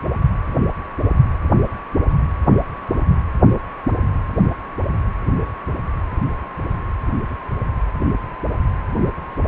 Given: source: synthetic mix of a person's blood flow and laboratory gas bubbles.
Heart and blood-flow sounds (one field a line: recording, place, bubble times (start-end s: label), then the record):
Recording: Doppler ultrasound of blood flow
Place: precordium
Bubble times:
no bubbles
From the record:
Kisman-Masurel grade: 000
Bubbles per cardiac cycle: 0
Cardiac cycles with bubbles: 0%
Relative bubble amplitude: no bubbles discernible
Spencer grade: 0 (complete lack of bubble signals)